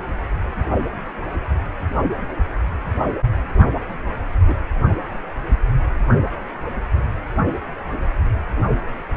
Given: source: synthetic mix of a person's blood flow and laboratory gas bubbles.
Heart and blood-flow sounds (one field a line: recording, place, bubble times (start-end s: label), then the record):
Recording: Doppler ultrasound of blood flow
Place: precordium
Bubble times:
4.47-4.54 s: bubbles
From the record:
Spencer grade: 1 (occasional bubble signal discernible with the cardiac motion signal, with majority of cardiac periods free of bubbles)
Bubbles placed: only in the low amplitude regions of the cardiac cycle